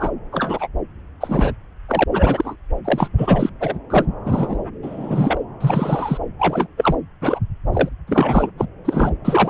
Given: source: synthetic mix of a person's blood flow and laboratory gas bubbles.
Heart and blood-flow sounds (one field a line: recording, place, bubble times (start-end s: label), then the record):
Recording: Doppler ultrasound of blood flow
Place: subclavian vein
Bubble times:
0.00-0.10 s: bubbles
0.32-0.67 s: bubbles
1.20-1.51 s: bubbles
1.88-2.04 s: bubbles
2.10-2.55 s: bubbles
2.84-3.08 s: bubbles
3.17-3.50 s: bubbles
3.60-3.78 s: bubbles
3.90-4.05 s: bubbles
4.25-4.56 s: bubbles
4.83-5.39 s: bubbles
5.60-6.17 s: bubbles
6.38-6.67 s: bubbles
6.77-6.95 s: bubbles
7.21-7.39 s: bubbles
7.73-7.89 s: bubbles
8.07-8.51 s: bubbles
8.57-8.65 s: bubbles
8.85-9.12 s: bubbles
9.24-9.50 s: bubbles
From the record:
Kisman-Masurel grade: 243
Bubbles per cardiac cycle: several, 3 to 8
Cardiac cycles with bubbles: 100%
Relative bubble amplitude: loud (0.450 to 0.775)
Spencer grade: 3 (all of the cardiac periods contain showers or single bubble signals, but not dominating or overriding the cardiac motion signals)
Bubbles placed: anywhere in the cardiac cycle